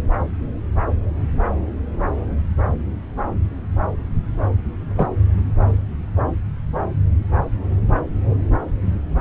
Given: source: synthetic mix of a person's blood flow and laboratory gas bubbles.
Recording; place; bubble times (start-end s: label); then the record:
Doppler ultrasound of blood flow; subclavian vein
4.96-5.08 s: bubbles
From the record:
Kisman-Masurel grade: 112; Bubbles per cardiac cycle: 1 to 2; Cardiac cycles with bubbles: 1 to 10%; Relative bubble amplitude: moderate (0.250 to 0.450); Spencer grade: 1 (occasional bubble signal discernible with the cardiac motion signal, with majority of cardiac periods free of bubbles); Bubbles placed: anywhere in the cardiac cycle